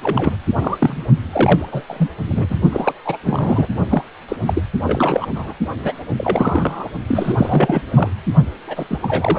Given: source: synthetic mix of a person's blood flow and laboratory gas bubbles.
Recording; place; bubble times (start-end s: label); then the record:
Doppler ultrasound of blood flow; precordium
0.02-0.36 s: bubbles
0.58-1.05 s: bubbles
1.32-1.83 s: bubbles
1.88-2.10 s: bubbles
2.27-2.56 s: bubbles
2.72-2.94 s: bubbles
3.05-3.17 s: bubbles
3.23-3.68 s: bubbles
3.89-4.03 s: bubbles
4.28-4.36 s: bubbles
4.46-4.62 s: bubbles
4.82-5.30 s: bubbles
5.35-5.53 s: bubbles
5.83-5.94 s: bubbles
6.08-6.89 s: bubbles
7.08-7.82 s: bubbles
7.94-8.11 s: bubbles
8.67-8.98 s: bubbles
9.03-9.39 s: bubbles
From the record:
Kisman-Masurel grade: 342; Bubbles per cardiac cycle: rolling drumbeat, 9 or more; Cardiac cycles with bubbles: 100%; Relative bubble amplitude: moderate (0.250 to 0.450); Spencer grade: 3 (all of the cardiac periods contain showers or single bubble signals, but not dominating or overriding the cardiac motion signals); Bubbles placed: only in the low amplitude regions of the cardiac cycle